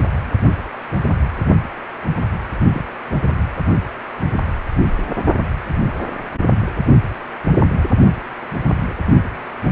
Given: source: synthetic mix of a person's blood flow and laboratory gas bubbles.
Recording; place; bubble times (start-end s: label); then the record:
Doppler ultrasound of blood flow; precordium
2.73-2.85 s: bubbles
3.10-3.17 s: bubbles
8.88-8.93 s: bubbles
From the record:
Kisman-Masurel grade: 121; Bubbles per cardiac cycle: 1 to 2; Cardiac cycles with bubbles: 10 to 50%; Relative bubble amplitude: barely perceptible (0.100 to 0.250); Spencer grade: 2 (many but less than half of the cardiac periods contain bubble signals, singularly or in groups); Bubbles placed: only in the low amplitude regions of the cardiac cycle